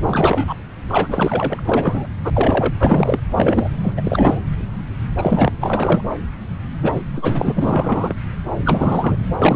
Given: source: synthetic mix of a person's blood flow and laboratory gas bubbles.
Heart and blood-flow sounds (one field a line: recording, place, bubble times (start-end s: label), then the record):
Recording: Doppler ultrasound of blood flow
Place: subclavian vein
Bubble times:
0.06-0.54 s: bubbles
0.88-1.61 s: bubbles
1.65-2.08 s: bubbles
2.23-2.30 s: bubbles
2.33-2.73 s: bubbles
2.79-3.19 s: bubbles
3.36-3.69 s: bubbles
3.82-3.93 s: bubbles
3.97-4.02 s: bubbles
4.04-4.40 s: bubbles
5.17-5.52 s: bubbles
5.60-6.02 s: bubbles
6.82-7.02 s: bubbles
7.15-7.52 s: bubbles
7.55-8.13 s: bubbles
8.65-9.16 s: bubbles
9.38-9.56 s: bubbles
From the record:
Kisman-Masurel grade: 333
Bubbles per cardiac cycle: rolling drumbeat, 9 or more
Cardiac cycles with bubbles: 50 to 99%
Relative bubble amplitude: loud (0.450 to 0.775)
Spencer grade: 3 (all of the cardiac periods contain showers or single bubble signals, but not dominating or overriding the cardiac motion signals)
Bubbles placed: anywhere in the cardiac cycle